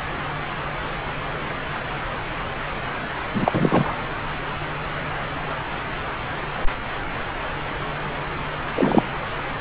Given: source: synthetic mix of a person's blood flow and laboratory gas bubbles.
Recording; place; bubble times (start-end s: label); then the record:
Doppler ultrasound of blood flow; subclavian vein
3.35-3.95 s: bubbles
8.74-9.03 s: bubbles
From the record:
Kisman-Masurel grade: 223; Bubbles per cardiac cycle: several, 3 to 8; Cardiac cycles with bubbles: 10 to 50%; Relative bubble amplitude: loud (0.450 to 0.775); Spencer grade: 2 (many but less than half of the cardiac periods contain bubble signals, singularly or in groups); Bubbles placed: anywhere in the cardiac cycle